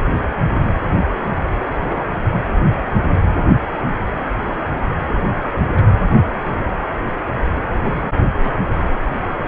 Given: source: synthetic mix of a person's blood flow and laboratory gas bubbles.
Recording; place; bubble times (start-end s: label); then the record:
Doppler ultrasound of blood flow; precordium
1.68-2.03 s: bubbles
2.32-2.43 s: bubbles
5.42-5.50 s: bubbles
5.71-5.85 s: bubbles
7.92-8.11 s: bubbles
8.42-8.53 s: bubbles
From the record:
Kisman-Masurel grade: 121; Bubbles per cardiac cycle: 1 to 2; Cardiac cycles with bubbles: 10 to 50%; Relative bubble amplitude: barely perceptible (0.100 to 0.250); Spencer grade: 2 (many but less than half of the cardiac periods contain bubble signals, singularly or in groups); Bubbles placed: anywhere in the cardiac cycle